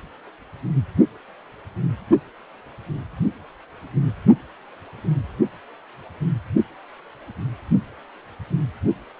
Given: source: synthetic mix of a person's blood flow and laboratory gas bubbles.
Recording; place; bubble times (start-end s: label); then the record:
Doppler ultrasound of blood flow; precordium
no bubbles
From the record:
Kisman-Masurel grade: 000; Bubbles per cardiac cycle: 0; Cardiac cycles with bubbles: 0%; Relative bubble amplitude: no bubbles discernible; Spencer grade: 0 (complete lack of bubble signals)